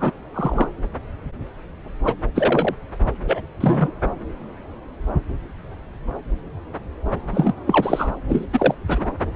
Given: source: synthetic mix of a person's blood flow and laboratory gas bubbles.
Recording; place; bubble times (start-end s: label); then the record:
Doppler ultrasound of blood flow; subclavian vein
0.00-0.12 s: bubbles
0.34-0.69 s: bubbles
2.04-2.15 s: bubbles
2.35-2.75 s: bubbles
3.25-3.40 s: bubbles
3.60-3.92 s: bubbles
7.31-7.54 s: bubbles
7.67-8.11 s: bubbles
8.28-8.46 s: bubbles
8.53-8.75 s: bubbles
8.88-9.06 s: bubbles
From the record:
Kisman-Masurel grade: 233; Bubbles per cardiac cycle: several, 3 to 8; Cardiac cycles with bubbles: 50 to 99%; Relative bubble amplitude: loud (0.450 to 0.775); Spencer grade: 3 (all of the cardiac periods contain showers or single bubble signals, but not dominating or overriding the cardiac motion signals); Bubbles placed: anywhere in the cardiac cycle